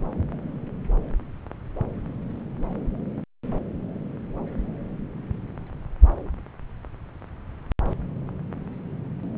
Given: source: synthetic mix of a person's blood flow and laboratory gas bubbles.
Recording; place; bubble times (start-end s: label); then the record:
Doppler ultrasound of blood flow; subclavian vein
no bubbles
From the record:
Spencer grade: 0 (complete lack of bubble signals)